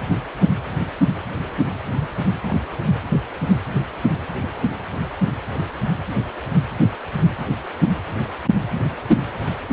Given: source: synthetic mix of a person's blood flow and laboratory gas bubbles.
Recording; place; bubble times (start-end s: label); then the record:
Doppler ultrasound of blood flow; precordium
1.99-2.08 s: bubbles
2.48-2.58 s: bubbles
From the record:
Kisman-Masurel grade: 111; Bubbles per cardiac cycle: 1 to 2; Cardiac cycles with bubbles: 1 to 10%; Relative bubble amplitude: barely perceptible (0.100 to 0.250); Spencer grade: 1 (occasional bubble signal discernible with the cardiac motion signal, with majority of cardiac periods free of bubbles); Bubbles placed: anywhere in the cardiac cycle